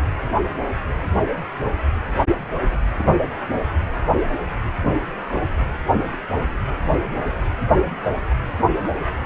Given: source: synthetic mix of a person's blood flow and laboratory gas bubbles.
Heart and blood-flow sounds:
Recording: Doppler ultrasound of blood flow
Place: precordium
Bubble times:
2.71-2.78 s: bubbles
From the record:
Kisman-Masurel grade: 111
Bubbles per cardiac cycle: 1 to 2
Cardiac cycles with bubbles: 1 to 10%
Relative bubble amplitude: barely perceptible (0.100 to 0.250)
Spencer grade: 1 (occasional bubble signal discernible with the cardiac motion signal, with majority of cardiac periods free of bubbles)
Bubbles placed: anywhere in the cardiac cycle

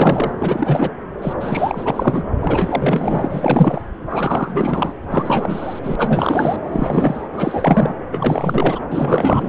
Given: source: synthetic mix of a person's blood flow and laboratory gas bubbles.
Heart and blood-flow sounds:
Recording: Doppler ultrasound of blood flow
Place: subclavian vein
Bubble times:
0.00-0.32 s: bubbles
0.36-0.91 s: bubbles
1.21-1.34 s: bubbles
1.40-2.26 s: bubbles
2.41-3.81 s: bubbles
4.08-4.94 s: bubbles
5.10-5.80 s: bubbles
5.83-6.56 s: bubbles
6.63-7.29 s: bubbles
7.32-7.95 s: bubbles
8.12-8.80 s: bubbles
8.90-9.49 s: bubbles
From the record:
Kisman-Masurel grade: 444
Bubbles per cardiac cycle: continuous sound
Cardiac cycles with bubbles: 100%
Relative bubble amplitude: maximal (0.775 to 0.999)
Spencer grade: 4 (maximum detectable bubble signal sounding continuously throughout systole and diastole of every cardiac period, and overriding the amplitude of the normal cardiac signals)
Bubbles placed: anywhere in the cardiac cycle

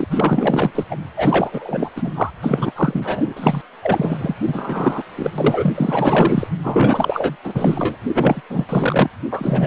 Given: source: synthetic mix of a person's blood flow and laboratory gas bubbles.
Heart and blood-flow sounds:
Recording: Doppler ultrasound of blood flow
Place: precordium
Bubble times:
0.00-0.05 s: bubbles
0.10-0.71 s: bubbles
0.74-0.84 s: bubbles
0.90-0.96 s: bubbles
1.16-1.90 s: bubbles
1.96-2.30 s: bubbles
2.42-2.73 s: bubbles
2.76-3.33 s: bubbles
3.36-3.61 s: bubbles
3.82-4.35 s: bubbles
4.43-5.03 s: bubbles
5.16-5.32 s: bubbles
5.38-6.48 s: bubbles
6.62-7.37 s: bubbles
7.44-7.96 s: bubbles
8.07-8.41 s: bubbles
8.50-8.65 s: bubbles
8.69-9.09 s: bubbles
9.31-9.67 s: bubbles
From the record:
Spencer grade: 4 (maximum detectable bubble signal sounding continuously throughout systole and diastole of every cardiac period, and overriding the amplitude of the normal cardiac signals)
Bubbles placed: anywhere in the cardiac cycle

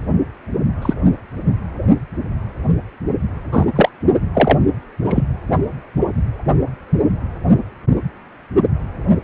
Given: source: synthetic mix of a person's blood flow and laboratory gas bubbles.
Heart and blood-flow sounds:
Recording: Doppler ultrasound of blood flow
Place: precordium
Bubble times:
0.81-0.94 s: bubbles
3.52-3.65 s: bubbles
3.75-3.89 s: bubbles
4.33-4.58 s: bubbles
5.04-5.21 s: bubbles
From the record:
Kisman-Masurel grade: 123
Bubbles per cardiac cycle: 1 to 2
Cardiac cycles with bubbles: 10 to 50%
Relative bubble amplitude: loud (0.450 to 0.775)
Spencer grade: 2 (many but less than half of the cardiac periods contain bubble signals, singularly or in groups)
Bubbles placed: only in the low amplitude regions of the cardiac cycle

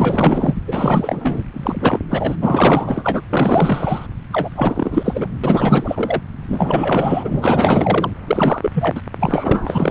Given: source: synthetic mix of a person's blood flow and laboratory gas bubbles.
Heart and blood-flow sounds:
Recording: Doppler ultrasound of blood flow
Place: subclavian vein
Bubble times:
0.00-0.61 s: bubbles
0.68-1.44 s: bubbles
1.53-1.98 s: bubbles
2.10-2.36 s: bubbles
2.41-3.21 s: bubbles
3.29-4.07 s: bubbles
4.33-4.50 s: bubbles
4.55-5.28 s: bubbles
5.44-6.21 s: bubbles
6.43-8.10 s: bubbles
8.26-8.71 s: bubbles
8.74-9.01 s: bubbles
9.20-9.90 s: bubbles
From the record:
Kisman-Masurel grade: 444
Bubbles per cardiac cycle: continuous sound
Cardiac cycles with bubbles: 100%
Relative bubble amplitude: maximal (0.775 to 0.999)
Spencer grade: 4 (maximum detectable bubble signal sounding continuously throughout systole and diastole of every cardiac period, and overriding the amplitude of the normal cardiac signals)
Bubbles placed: anywhere in the cardiac cycle

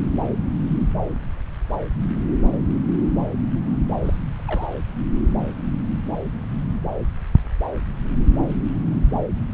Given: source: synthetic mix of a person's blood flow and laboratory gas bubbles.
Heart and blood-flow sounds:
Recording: Doppler ultrasound of blood flow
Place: subclavian vein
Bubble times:
4.04-4.18 s: bubbles
4.37-4.67 s: bubbles
From the record:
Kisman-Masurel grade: 211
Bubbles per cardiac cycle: several, 3 to 8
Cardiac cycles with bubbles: 1 to 10%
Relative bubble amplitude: barely perceptible (0.100 to 0.250)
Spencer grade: 1 (occasional bubble signal discernible with the cardiac motion signal, with majority of cardiac periods free of bubbles)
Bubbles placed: anywhere in the cardiac cycle

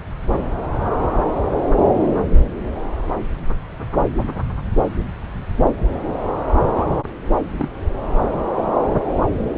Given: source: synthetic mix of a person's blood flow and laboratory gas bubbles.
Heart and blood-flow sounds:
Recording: Doppler ultrasound of blood flow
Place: subclavian vein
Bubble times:
6.75-6.85 s: bubbles
7.58-7.68 s: bubbles
From the record:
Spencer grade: 2 (many but less than half of the cardiac periods contain bubble signals, singularly or in groups)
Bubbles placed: anywhere in the cardiac cycle

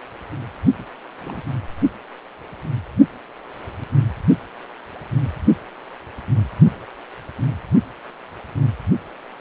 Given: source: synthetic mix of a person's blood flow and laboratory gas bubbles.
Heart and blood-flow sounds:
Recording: Doppler ultrasound of blood flow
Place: precordium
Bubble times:
0.78-0.91 s: bubbles
1.20-1.42 s: bubbles
From the record:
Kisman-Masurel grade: 221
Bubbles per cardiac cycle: several, 3 to 8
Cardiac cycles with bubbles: 10 to 50%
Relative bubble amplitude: barely perceptible (0.100 to 0.250)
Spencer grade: 2 (many but less than half of the cardiac periods contain bubble signals, singularly or in groups)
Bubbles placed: only in the low amplitude regions of the cardiac cycle

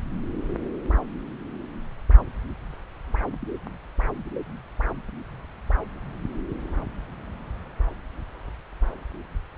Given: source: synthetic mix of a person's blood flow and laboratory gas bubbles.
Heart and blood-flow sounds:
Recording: Doppler ultrasound of blood flow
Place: subclavian vein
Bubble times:
no bubbles
From the record:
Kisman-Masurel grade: 000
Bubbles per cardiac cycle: 0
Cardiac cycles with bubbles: 0%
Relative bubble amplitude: no bubbles discernible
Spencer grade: 0 (complete lack of bubble signals)

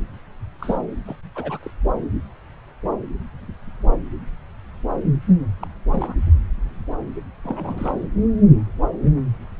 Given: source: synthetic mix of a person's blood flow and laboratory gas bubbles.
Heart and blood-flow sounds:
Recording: Doppler ultrasound of blood flow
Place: subclavian vein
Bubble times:
0.59-0.78 s: bubbles
1.06-1.16 s: bubbles
1.35-1.58 s: bubbles
1.62-1.71 s: bubbles
5.61-5.68 s: bubbles
5.91-6.15 s: bubbles
7.44-8.07 s: bubbles
From the record:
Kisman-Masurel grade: 221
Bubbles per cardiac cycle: several, 3 to 8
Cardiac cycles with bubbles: 10 to 50%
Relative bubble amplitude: barely perceptible (0.100 to 0.250)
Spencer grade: 2 (many but less than half of the cardiac periods contain bubble signals, singularly or in groups)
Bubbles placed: anywhere in the cardiac cycle

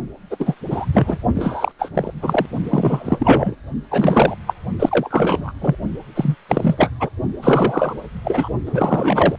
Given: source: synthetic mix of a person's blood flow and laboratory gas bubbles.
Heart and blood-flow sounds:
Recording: Doppler ultrasound of blood flow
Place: precordium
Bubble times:
0.30-0.54 s: bubbles
0.70-0.85 s: bubbles
0.93-1.19 s: bubbles
1.34-1.71 s: bubbles
1.79-1.90 s: bubbles
1.94-2.12 s: bubbles
2.22-2.46 s: bubbles
2.63-3.56 s: bubbles
3.91-4.36 s: bubbles
4.47-4.54 s: bubbles
4.79-5.52 s: bubbles
5.61-5.75 s: bubbles
6.15-6.35 s: bubbles
6.49-6.90 s: bubbles
7.00-7.09 s: bubbles
7.42-7.94 s: bubbles
8.24-8.48 s: bubbles
8.65-9.36 s: bubbles
From the record:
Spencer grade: 3 (all of the cardiac periods contain showers or single bubble signals, but not dominating or overriding the cardiac motion signals)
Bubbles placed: only in the low amplitude regions of the cardiac cycle

